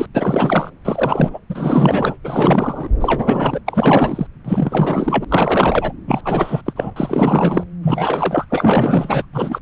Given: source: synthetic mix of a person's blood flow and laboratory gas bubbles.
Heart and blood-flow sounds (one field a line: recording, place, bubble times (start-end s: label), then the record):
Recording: Doppler ultrasound of blood flow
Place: subclavian vein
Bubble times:
0.00-0.07 s: bubbles
0.15-0.70 s: bubbles
0.84-1.39 s: bubbles
1.49-2.18 s: bubbles
2.23-2.89 s: bubbles
3.00-3.60 s: bubbles
3.67-4.27 s: bubbles
4.44-5.24 s: bubbles
5.28-5.92 s: bubbles
6.06-6.21 s: bubbles
6.24-6.61 s: bubbles
6.65-6.73 s: bubbles
6.75-6.90 s: bubbles
6.96-7.63 s: bubbles
7.82-8.46 s: bubbles
8.50-9.26 s: bubbles
9.33-9.62 s: bubbles
From the record:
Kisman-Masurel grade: 444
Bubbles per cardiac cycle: continuous sound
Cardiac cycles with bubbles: 100%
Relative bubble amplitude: maximal (0.775 to 0.999)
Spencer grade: 4 (maximum detectable bubble signal sounding continuously throughout systole and diastole of every cardiac period, and overriding the amplitude of the normal cardiac signals)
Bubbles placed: anywhere in the cardiac cycle